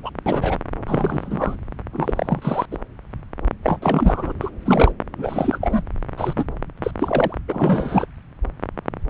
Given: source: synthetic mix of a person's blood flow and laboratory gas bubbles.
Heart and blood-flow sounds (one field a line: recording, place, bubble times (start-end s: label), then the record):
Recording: Doppler ultrasound of blood flow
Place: subclavian vein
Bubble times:
0.03-0.11 s: bubbles
0.26-0.58 s: bubbles
0.86-1.57 s: bubbles
1.93-2.66 s: bubbles
2.71-2.77 s: bubbles
3.63-3.79 s: bubbles
3.82-4.33 s: bubbles
4.40-4.50 s: bubbles
4.65-4.92 s: bubbles
5.18-5.58 s: bubbles
5.61-5.82 s: bubbles
6.17-6.33 s: bubbles
6.36-6.45 s: bubbles
6.83-6.91 s: bubbles
6.99-7.37 s: bubbles
7.48-8.06 s: bubbles
From the record:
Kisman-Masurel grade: 333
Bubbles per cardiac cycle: rolling drumbeat, 9 or more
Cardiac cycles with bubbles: 50 to 99%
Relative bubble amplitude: loud (0.450 to 0.775)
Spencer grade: 3 (all of the cardiac periods contain showers or single bubble signals, but not dominating or overriding the cardiac motion signals)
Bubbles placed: anywhere in the cardiac cycle